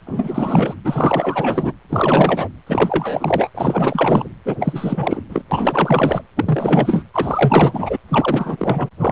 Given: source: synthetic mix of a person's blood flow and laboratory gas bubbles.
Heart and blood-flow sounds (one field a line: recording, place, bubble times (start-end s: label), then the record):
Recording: Doppler ultrasound of blood flow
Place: precordium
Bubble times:
0.07-0.74 s: bubbles
0.84-1.73 s: bubbles
1.89-2.49 s: bubbles
2.67-3.50 s: bubbles
3.54-4.29 s: bubbles
4.45-4.56 s: bubbles
4.60-5.22 s: bubbles
5.29-5.43 s: bubbles
5.51-6.22 s: bubbles
6.36-7.03 s: bubbles
7.13-7.98 s: bubbles
8.08-8.88 s: bubbles
8.99-9.12 s: bubbles
From the record:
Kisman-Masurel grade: 444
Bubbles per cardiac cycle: continuous sound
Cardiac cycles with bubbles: 100%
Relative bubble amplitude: maximal (0.775 to 0.999)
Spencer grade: 4 (maximum detectable bubble signal sounding continuously throughout systole and diastole of every cardiac period, and overriding the amplitude of the normal cardiac signals)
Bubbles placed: anywhere in the cardiac cycle